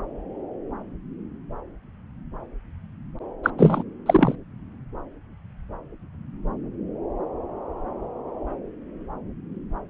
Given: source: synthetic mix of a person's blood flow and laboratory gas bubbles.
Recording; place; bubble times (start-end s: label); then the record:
Doppler ultrasound of blood flow; subclavian vein
3.44-3.50 s: bubbles
3.58-3.83 s: bubbles
4.06-4.36 s: bubbles
From the record:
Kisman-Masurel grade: 213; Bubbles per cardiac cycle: several, 3 to 8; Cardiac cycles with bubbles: 1 to 10%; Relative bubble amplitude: loud (0.450 to 0.775); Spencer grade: 1 (occasional bubble signal discernible with the cardiac motion signal, with majority of cardiac periods free of bubbles); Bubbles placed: anywhere in the cardiac cycle